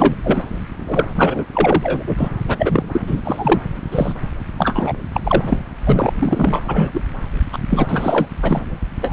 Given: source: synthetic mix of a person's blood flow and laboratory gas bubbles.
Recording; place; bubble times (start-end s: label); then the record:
Doppler ultrasound of blood flow; subclavian vein
0.00-0.14 s: bubbles
0.24-0.45 s: bubbles
0.88-1.08 s: bubbles
1.15-1.46 s: bubbles
1.53-2.03 s: bubbles
2.06-2.29 s: bubbles
2.48-2.84 s: bubbles
2.92-3.01 s: bubbles
3.07-3.22 s: bubbles
3.24-3.59 s: bubbles
3.92-4.15 s: bubbles
4.58-4.93 s: bubbles
5.12-5.21 s: bubbles
5.23-5.57 s: bubbles
5.84-6.61 s: bubbles
6.67-7.01 s: bubbles
7.52-7.58 s: bubbles
7.70-8.28 s: bubbles
8.42-8.65 s: bubbles
9.00-9.13 s: bubbles
From the record:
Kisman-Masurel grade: 444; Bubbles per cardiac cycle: continuous sound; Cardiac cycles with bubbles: 100%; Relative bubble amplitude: maximal (0.775 to 0.999); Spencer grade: 4 (maximum detectable bubble signal sounding continuously throughout systole and diastole of every cardiac period, and overriding the amplitude of the normal cardiac signals); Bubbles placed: anywhere in the cardiac cycle